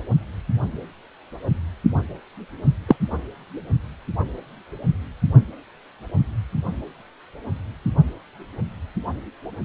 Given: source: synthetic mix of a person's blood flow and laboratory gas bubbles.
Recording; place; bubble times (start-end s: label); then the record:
Doppler ultrasound of blood flow; precordium
2.88-2.96 s: bubbles
From the record:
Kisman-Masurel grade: 123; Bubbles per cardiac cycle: 1 to 2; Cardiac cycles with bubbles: 10 to 50%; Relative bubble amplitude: loud (0.450 to 0.775); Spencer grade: 2 (many but less than half of the cardiac periods contain bubble signals, singularly or in groups); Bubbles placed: only in the low amplitude regions of the cardiac cycle